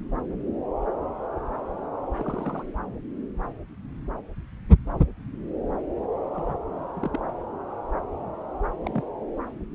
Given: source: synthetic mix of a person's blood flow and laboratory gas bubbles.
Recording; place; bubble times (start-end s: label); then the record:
Doppler ultrasound of blood flow; subclavian vein
2.19-2.66 s: bubbles
6.34-6.58 s: bubbles
6.96-7.20 s: bubbles
8.85-9.02 s: bubbles
From the record:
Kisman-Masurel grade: 121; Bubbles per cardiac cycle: 1 to 2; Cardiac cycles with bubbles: 10 to 50%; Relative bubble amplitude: barely perceptible (0.100 to 0.250); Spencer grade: 2 (many but less than half of the cardiac periods contain bubble signals, singularly or in groups); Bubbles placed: anywhere in the cardiac cycle